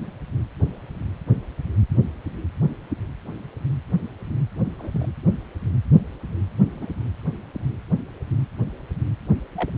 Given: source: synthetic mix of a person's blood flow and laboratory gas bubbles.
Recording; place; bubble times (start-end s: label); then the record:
Doppler ultrasound of blood flow; precordium
4.79-5.08 s: bubbles
6.73-6.87 s: bubbles
6.89-6.94 s: bubbles
9.56-9.71 s: bubbles
From the record:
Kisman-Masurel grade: 121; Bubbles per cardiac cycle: 1 to 2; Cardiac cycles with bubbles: 10 to 50%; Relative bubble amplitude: barely perceptible (0.100 to 0.250); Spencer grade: 2 (many but less than half of the cardiac periods contain bubble signals, singularly or in groups); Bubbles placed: anywhere in the cardiac cycle